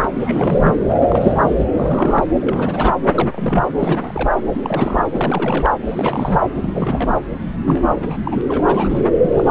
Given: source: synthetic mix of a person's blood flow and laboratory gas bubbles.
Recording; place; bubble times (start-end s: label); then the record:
Doppler ultrasound of blood flow; subclavian vein
0.00-0.08 s: bubbles
0.19-0.75 s: bubbles
0.89-1.64 s: bubbles
1.76-2.23 s: bubbles
2.40-2.91 s: bubbles
3.04-3.67 s: bubbles
3.77-4.29 s: bubbles
4.54-5.06 s: bubbles
5.11-5.75 s: bubbles
5.83-6.42 s: bubbles
6.54-7.11 s: bubbles
7.66-8.16 s: bubbles
8.24-8.41 s: bubbles
8.48-9.05 s: bubbles
9.22-9.51 s: bubbles
From the record:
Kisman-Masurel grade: 342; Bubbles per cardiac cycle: rolling drumbeat, 9 or more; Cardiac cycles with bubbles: 100%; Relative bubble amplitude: moderate (0.250 to 0.450); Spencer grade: 3 (all of the cardiac periods contain showers or single bubble signals, but not dominating or overriding the cardiac motion signals); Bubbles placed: anywhere in the cardiac cycle